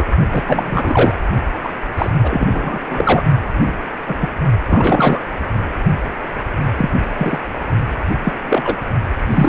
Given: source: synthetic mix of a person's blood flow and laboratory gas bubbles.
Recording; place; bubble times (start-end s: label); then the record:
Doppler ultrasound of blood flow; precordium
0.00-0.09 s: bubbles
0.32-0.43 s: bubbles
0.47-1.18 s: bubbles
1.64-1.70 s: bubbles
1.97-2.10 s: bubbles
2.23-2.79 s: bubbles
2.89-3.24 s: bubbles
3.57-3.78 s: bubbles
4.07-4.17 s: bubbles
4.21-4.33 s: bubbles
4.68-5.21 s: bubbles
6.78-6.90 s: bubbles
7.17-7.38 s: bubbles
8.25-8.34 s: bubbles
8.46-8.77 s: bubbles
9.30-9.49 s: bubbles
From the record:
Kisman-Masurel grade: 243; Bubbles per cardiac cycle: several, 3 to 8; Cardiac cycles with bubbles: 100%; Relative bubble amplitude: loud (0.450 to 0.775); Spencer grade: 3 (all of the cardiac periods contain showers or single bubble signals, but not dominating or overriding the cardiac motion signals); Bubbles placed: only in the low amplitude regions of the cardiac cycle